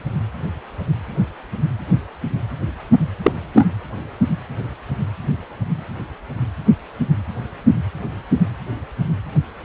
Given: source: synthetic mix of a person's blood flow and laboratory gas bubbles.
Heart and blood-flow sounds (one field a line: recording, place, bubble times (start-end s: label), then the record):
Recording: Doppler ultrasound of blood flow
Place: precordium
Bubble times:
3.23-3.32 s: bubbles
3.54-3.68 s: bubbles
From the record:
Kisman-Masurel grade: 113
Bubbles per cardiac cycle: 1 to 2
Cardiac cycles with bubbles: 1 to 10%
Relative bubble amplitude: loud (0.450 to 0.775)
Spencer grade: 1 (occasional bubble signal discernible with the cardiac motion signal, with majority of cardiac periods free of bubbles)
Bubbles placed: anywhere in the cardiac cycle